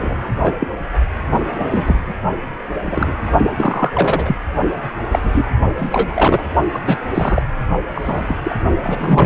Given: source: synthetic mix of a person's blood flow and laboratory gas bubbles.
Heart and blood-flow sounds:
Doppler ultrasound of blood flow; precordium
0.00-0.17 s: bubbles
0.43-0.54 s: bubbles
0.59-0.67 s: bubbles
1.60-2.12 s: bubbles
2.85-3.16 s: bubbles
3.56-3.90 s: bubbles
3.93-4.36 s: bubbles
5.11-5.19 s: bubbles
5.23-5.46 s: bubbles
5.77-6.42 s: bubbles
6.72-6.81 s: bubbles
6.85-6.97 s: bubbles
7.14-7.42 s: bubbles
7.94-8.37 s: bubbles
8.44-8.58 s: bubbles
8.83-9.26 s: bubbles
From the record:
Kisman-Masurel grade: 243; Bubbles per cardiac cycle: several, 3 to 8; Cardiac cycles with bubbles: 100%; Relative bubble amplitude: loud (0.450 to 0.775); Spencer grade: 3 (all of the cardiac periods contain showers or single bubble signals, but not dominating or overriding the cardiac motion signals); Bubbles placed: only in the low amplitude regions of the cardiac cycle

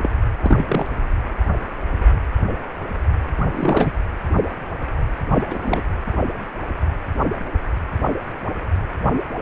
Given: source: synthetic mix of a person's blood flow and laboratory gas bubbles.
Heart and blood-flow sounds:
Doppler ultrasound of blood flow; precordium
0.00-0.11 s: bubbles
0.40-0.87 s: bubbles
3.47-3.98 s: bubbles
5.32-5.42 s: bubbles
5.50-5.82 s: bubbles
From the record:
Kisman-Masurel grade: 222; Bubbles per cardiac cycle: several, 3 to 8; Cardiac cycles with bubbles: 10 to 50%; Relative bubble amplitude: moderate (0.250 to 0.450); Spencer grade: 2 (many but less than half of the cardiac periods contain bubble signals, singularly or in groups); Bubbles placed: anywhere in the cardiac cycle

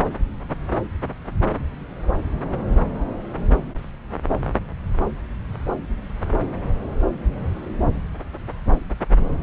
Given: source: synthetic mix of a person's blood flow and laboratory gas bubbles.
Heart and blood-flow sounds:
Doppler ultrasound of blood flow; subclavian vein
no bubbles
From the record:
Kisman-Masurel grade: 000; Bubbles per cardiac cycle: 0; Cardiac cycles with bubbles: 0%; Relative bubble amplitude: no bubbles discernible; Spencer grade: 0 (complete lack of bubble signals)

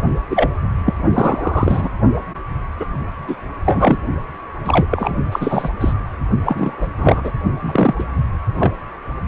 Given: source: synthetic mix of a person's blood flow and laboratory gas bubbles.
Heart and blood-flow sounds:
Doppler ultrasound of blood flow; precordium
0.29-0.49 s: bubbles
0.85-0.93 s: bubbles
1.13-1.89 s: bubbles
2.80-2.85 s: bubbles
3.28-3.35 s: bubbles
3.65-3.98 s: bubbles
4.64-4.85 s: bubbles
4.90-5.17 s: bubbles
5.31-5.69 s: bubbles
5.80-5.93 s: bubbles
6.44-6.88 s: bubbles
6.97-7.31 s: bubbles
7.60-7.94 s: bubbles
7.98-8.04 s: bubbles
8.58-8.72 s: bubbles
From the record:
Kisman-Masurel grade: 243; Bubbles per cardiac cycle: several, 3 to 8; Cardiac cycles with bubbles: 100%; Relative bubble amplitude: loud (0.450 to 0.775); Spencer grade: 3 (all of the cardiac periods contain showers or single bubble signals, but not dominating or overriding the cardiac motion signals); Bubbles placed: only in the low amplitude regions of the cardiac cycle

